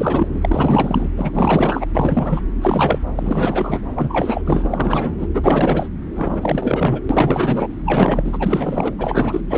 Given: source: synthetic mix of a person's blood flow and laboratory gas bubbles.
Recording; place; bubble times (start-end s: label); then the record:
Doppler ultrasound of blood flow; subclavian vein
0.00-1.09 s: bubbles
1.17-1.86 s: bubbles
1.95-2.42 s: bubbles
2.61-2.99 s: bubbles
3.15-3.81 s: bubbles
3.94-4.42 s: bubbles
4.45-5.27 s: bubbles
5.33-5.89 s: bubbles
6.15-7.00 s: bubbles
7.09-7.67 s: bubbles
7.84-8.95 s: bubbles
8.98-9.41 s: bubbles
9.49-9.58 s: bubbles
From the record:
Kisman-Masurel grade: 444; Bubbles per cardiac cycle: continuous sound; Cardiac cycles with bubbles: 100%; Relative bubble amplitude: maximal (0.775 to 0.999); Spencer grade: 4 (maximum detectable bubble signal sounding continuously throughout systole and diastole of every cardiac period, and overriding the amplitude of the normal cardiac signals); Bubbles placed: anywhere in the cardiac cycle